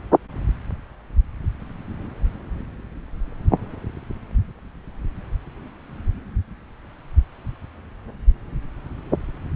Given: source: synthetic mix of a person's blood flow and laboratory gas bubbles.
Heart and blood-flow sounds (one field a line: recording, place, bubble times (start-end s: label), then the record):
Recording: Doppler ultrasound of blood flow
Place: subclavian vein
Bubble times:
no bubbles
From the record:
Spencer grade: 0 (complete lack of bubble signals)